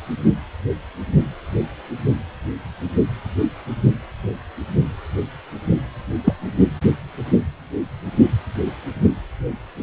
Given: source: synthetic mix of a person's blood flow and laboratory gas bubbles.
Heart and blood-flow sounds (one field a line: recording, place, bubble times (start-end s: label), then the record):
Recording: Doppler ultrasound of blood flow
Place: precordium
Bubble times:
6.24-6.33 s: bubbles
From the record:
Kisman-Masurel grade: 113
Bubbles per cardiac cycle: 1 to 2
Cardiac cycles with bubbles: 1 to 10%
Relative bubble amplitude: loud (0.450 to 0.775)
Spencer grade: 1 (occasional bubble signal discernible with the cardiac motion signal, with majority of cardiac periods free of bubbles)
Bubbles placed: anywhere in the cardiac cycle